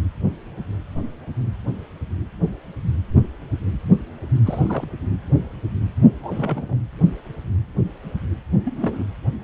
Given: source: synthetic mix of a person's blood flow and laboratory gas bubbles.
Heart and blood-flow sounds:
Doppler ultrasound of blood flow; precordium
4.46-4.86 s: bubbles
6.22-6.78 s: bubbles
8.65-9.04 s: bubbles
From the record:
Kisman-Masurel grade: 221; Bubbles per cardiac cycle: several, 3 to 8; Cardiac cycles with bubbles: 10 to 50%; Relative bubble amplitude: barely perceptible (0.100 to 0.250); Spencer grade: 2 (many but less than half of the cardiac periods contain bubble signals, singularly or in groups); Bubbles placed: anywhere in the cardiac cycle

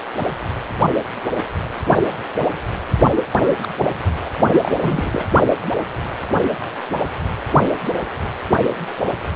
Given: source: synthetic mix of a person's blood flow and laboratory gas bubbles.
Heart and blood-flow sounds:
Doppler ultrasound of blood flow; precordium
3.17-3.23 s: bubbles
3.34-3.58 s: bubbles
3.62-3.68 s: bubbles
4.25-4.29 s: bubbles
4.52-4.71 s: bubbles
4.80-5.27 s: bubbles
From the record:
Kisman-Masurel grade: 222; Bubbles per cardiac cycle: several, 3 to 8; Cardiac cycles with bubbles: 10 to 50%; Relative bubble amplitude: moderate (0.250 to 0.450); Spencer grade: 2 (many but less than half of the cardiac periods contain bubble signals, singularly or in groups); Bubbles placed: only in the low amplitude regions of the cardiac cycle

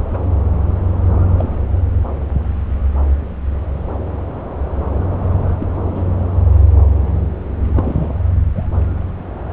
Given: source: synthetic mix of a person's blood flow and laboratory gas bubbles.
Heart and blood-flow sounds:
Doppler ultrasound of blood flow; subclavian vein
0.14-0.17 s: bubbles
1.38-1.48 s: bubbles
5.59-5.67 s: bubbles
5.95-6.03 s: bubbles
7.75-8.10 s: bubbles
8.54-8.67 s: bubbles
From the record:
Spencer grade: 2 (many but less than half of the cardiac periods contain bubble signals, singularly or in groups); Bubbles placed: anywhere in the cardiac cycle

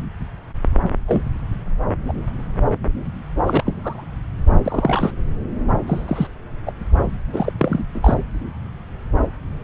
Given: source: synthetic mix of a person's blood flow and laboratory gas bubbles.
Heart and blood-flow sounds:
Doppler ultrasound of blood flow; subclavian vein
1.07-1.22 s: bubbles
2.08-2.12 s: bubbles
3.46-3.64 s: bubbles
3.66-4.05 s: bubbles
4.65-5.11 s: bubbles
5.87-6.27 s: bubbles
6.66-6.72 s: bubbles
7.33-7.52 s: bubbles
7.58-7.84 s: bubbles
7.94-8.14 s: bubbles
From the record:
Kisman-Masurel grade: 232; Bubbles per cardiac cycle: several, 3 to 8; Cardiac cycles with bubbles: 50 to 99%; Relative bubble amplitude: moderate (0.250 to 0.450); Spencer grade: 3 (all of the cardiac periods contain showers or single bubble signals, but not dominating or overriding the cardiac motion signals); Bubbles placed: anywhere in the cardiac cycle

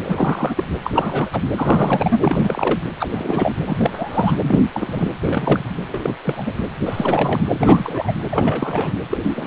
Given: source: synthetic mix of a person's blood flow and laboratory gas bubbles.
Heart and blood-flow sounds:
Doppler ultrasound of blood flow; precordium
0.00-0.02 s: bubbles
0.05-0.64 s: bubbles
0.84-0.90 s: bubbles
0.93-1.29 s: bubbles
1.32-1.42 s: bubbles
1.56-2.78 s: bubbles
2.99-3.07 s: bubbles
3.10-3.55 s: bubbles
3.67-4.37 s: bubbles
4.42-4.60 s: bubbles
4.72-5.08 s: bubbles
5.23-5.63 s: bubbles
5.87-6.13 s: bubbles
6.23-6.54 s: bubbles
6.85-7.55 s: bubbles
7.60-8.13 s: bubbles
8.29-8.94 s: bubbles
9.09-9.18 s: bubbles
9.23-9.47 s: bubbles
From the record:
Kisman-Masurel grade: 342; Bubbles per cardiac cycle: rolling drumbeat, 9 or more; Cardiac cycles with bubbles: 100%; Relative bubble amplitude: moderate (0.250 to 0.450); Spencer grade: 3 (all of the cardiac periods contain showers or single bubble signals, but not dominating or overriding the cardiac motion signals); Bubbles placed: anywhere in the cardiac cycle

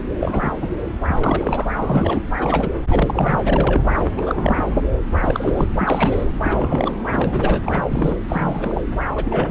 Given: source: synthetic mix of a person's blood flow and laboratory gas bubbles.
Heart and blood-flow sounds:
Doppler ultrasound of blood flow; subclavian vein
0.00-0.04 s: bubbles
0.20-0.53 s: bubbles
0.61-0.68 s: bubbles
1.08-1.73 s: bubbles
1.77-2.21 s: bubbles
2.37-2.71 s: bubbles
2.89-3.38 s: bubbles
3.42-3.83 s: bubbles
4.17-4.67 s: bubbles
5.21-5.70 s: bubbles
5.77-6.26 s: bubbles
6.42-6.92 s: bubbles
7.05-7.59 s: bubbles
7.66-7.86 s: bubbles
7.88-8.16 s: bubbles
8.29-8.82 s: bubbles
9.15-9.51 s: bubbles
From the record:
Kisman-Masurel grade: 343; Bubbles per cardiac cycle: rolling drumbeat, 9 or more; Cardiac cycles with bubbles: 100%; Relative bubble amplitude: loud (0.450 to 0.775); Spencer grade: 3 (all of the cardiac periods contain showers or single bubble signals, but not dominating or overriding the cardiac motion signals); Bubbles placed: anywhere in the cardiac cycle

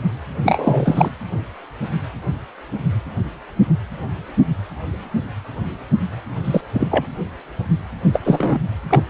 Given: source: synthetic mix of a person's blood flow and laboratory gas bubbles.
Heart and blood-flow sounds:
Doppler ultrasound of blood flow; precordium
0.43-1.09 s: bubbles
6.44-6.61 s: bubbles
6.73-6.88 s: bubbles
6.90-7.06 s: bubbles
8.12-8.20 s: bubbles
8.25-8.59 s: bubbles
8.89-9.04 s: bubbles
From the record:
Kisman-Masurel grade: 223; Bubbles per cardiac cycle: several, 3 to 8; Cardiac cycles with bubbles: 10 to 50%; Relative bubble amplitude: loud (0.450 to 0.775); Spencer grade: 2 (many but less than half of the cardiac periods contain bubble signals, singularly or in groups); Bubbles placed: anywhere in the cardiac cycle

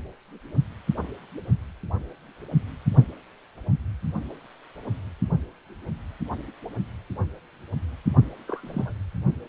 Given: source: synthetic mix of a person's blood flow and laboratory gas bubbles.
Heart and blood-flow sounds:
Doppler ultrasound of blood flow; precordium
8.47-8.93 s: bubbles
From the record:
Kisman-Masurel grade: 121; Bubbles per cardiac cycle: 1 to 2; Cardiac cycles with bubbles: 10 to 50%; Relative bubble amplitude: barely perceptible (0.100 to 0.250); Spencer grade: 2 (many but less than half of the cardiac periods contain bubble signals, singularly or in groups); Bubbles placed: only in the low amplitude regions of the cardiac cycle

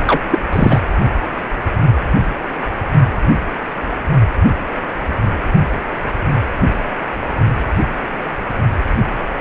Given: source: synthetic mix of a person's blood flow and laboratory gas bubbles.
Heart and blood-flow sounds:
Doppler ultrasound of blood flow; precordium
0.07-0.21 s: bubbles
0.31-0.40 s: bubbles
0.52-0.79 s: bubbles
From the record:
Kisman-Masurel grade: 213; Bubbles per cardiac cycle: several, 3 to 8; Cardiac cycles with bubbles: 1 to 10%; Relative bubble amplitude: loud (0.450 to 0.775); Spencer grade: 1 (occasional bubble signal discernible with the cardiac motion signal, with majority of cardiac periods free of bubbles); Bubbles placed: only in the low amplitude regions of the cardiac cycle

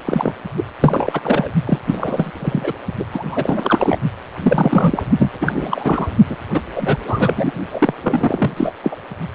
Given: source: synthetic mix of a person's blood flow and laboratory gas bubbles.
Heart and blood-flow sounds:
Doppler ultrasound of blood flow; precordium
0.06-0.33 s: bubbles
0.57-0.64 s: bubbles
0.80-1.52 s: bubbles
1.65-1.79 s: bubbles
1.87-2.31 s: bubbles
2.40-2.73 s: bubbles
2.99-3.04 s: bubbles
3.13-3.99 s: bubbles
4.43-5.03 s: bubbles
5.18-6.07 s: bubbles
6.29-6.37 s: bubbles
6.54-6.61 s: bubbles
6.75-6.97 s: bubbles
7.07-7.52 s: bubbles
7.71-7.93 s: bubbles
8.03-8.72 s: bubbles
8.83-8.96 s: bubbles
From the record:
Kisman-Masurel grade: 343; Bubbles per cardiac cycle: rolling drumbeat, 9 or more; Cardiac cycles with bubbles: 100%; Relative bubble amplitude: loud (0.450 to 0.775); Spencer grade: 3 (all of the cardiac periods contain showers or single bubble signals, but not dominating or overriding the cardiac motion signals); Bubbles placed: only in the low amplitude regions of the cardiac cycle

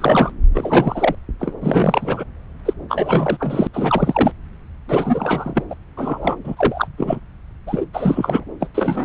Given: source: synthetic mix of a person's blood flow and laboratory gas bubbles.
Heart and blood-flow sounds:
Doppler ultrasound of blood flow; subclavian vein
0.00-0.32 s: bubbles
0.53-1.15 s: bubbles
1.39-1.53 s: bubbles
1.60-2.24 s: bubbles
2.65-2.73 s: bubbles
2.89-3.37 s: bubbles
3.40-3.67 s: bubbles
3.73-4.31 s: bubbles
4.89-5.63 s: bubbles
5.70-5.74 s: bubbles
5.97-6.37 s: bubbles
6.45-6.87 s: bubbles
6.97-7.20 s: bubbles
7.66-7.85 s: bubbles
7.93-8.45 s: bubbles
8.60-8.68 s: bubbles
8.74-9.05 s: bubbles
From the record:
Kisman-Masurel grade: 342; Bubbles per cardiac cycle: rolling drumbeat, 9 or more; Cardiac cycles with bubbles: 100%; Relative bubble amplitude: moderate (0.250 to 0.450); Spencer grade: 3 (all of the cardiac periods contain showers or single bubble signals, but not dominating or overriding the cardiac motion signals); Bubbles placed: anywhere in the cardiac cycle

